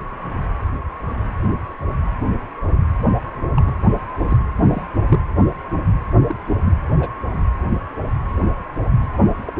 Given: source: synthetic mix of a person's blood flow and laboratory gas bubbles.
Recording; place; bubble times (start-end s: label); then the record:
Doppler ultrasound of blood flow; precordium
3.56-3.71 s: bubbles
4.18-4.24 s: bubbles
4.28-4.38 s: bubbles
4.55-4.83 s: bubbles
5.08-5.20 s: bubbles
6.28-6.35 s: bubbles
6.63-6.75 s: bubbles
7.00-7.08 s: bubbles
9.12-9.18 s: bubbles
9.45-9.53 s: bubbles
From the record:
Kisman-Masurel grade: 122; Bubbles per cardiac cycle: 1 to 2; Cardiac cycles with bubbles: 10 to 50%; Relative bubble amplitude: moderate (0.250 to 0.450); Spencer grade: 2 (many but less than half of the cardiac periods contain bubble signals, singularly or in groups); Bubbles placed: anywhere in the cardiac cycle